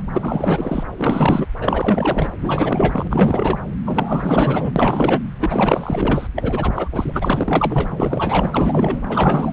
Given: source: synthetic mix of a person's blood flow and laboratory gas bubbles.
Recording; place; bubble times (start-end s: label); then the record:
Doppler ultrasound of blood flow; subclavian vein
0.00-0.03 s: bubbles
0.13-0.83 s: bubbles
0.97-1.47 s: bubbles
1.61-2.33 s: bubbles
2.40-3.08 s: bubbles
3.10-3.58 s: bubbles
3.85-4.73 s: bubbles
4.76-5.22 s: bubbles
5.39-6.27 s: bubbles
6.36-6.71 s: bubbles
6.75-6.89 s: bubbles
6.92-9.02 s: bubbles
9.09-9.53 s: bubbles
From the record:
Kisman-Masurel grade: 444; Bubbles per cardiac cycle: continuous sound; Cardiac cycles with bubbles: 100%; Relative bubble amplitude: maximal (0.775 to 0.999); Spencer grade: 4 (maximum detectable bubble signal sounding continuously throughout systole and diastole of every cardiac period, and overriding the amplitude of the normal cardiac signals); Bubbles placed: anywhere in the cardiac cycle